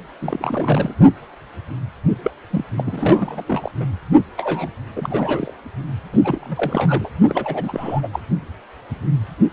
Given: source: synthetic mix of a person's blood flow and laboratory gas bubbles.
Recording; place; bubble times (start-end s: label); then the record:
Doppler ultrasound of blood flow; precordium
0.21-0.94 s: bubbles
2.23-2.30 s: bubbles
2.50-2.65 s: bubbles
2.77-3.44 s: bubbles
3.46-3.71 s: bubbles
3.80-3.84 s: bubbles
4.37-4.69 s: bubbles
4.96-5.54 s: bubbles
6.12-7.09 s: bubbles
7.27-8.08 s: bubbles
8.12-8.20 s: bubbles
From the record:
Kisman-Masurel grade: 332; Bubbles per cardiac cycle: rolling drumbeat, 9 or more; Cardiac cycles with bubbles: 50 to 99%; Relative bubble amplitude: moderate (0.250 to 0.450); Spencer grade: 3 (all of the cardiac periods contain showers or single bubble signals, but not dominating or overriding the cardiac motion signals); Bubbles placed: only in the low amplitude regions of the cardiac cycle